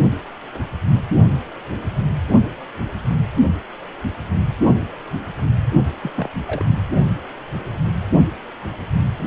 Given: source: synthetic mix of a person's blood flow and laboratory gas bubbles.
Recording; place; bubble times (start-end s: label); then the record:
Doppler ultrasound of blood flow; precordium
6.02-6.11 s: bubbles
6.16-6.29 s: bubbles
6.46-6.65 s: bubbles
From the record:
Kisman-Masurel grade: 211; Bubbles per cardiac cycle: several, 3 to 8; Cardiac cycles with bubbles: 1 to 10%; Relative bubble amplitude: barely perceptible (0.100 to 0.250); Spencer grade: 1 (occasional bubble signal discernible with the cardiac motion signal, with majority of cardiac periods free of bubbles); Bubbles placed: anywhere in the cardiac cycle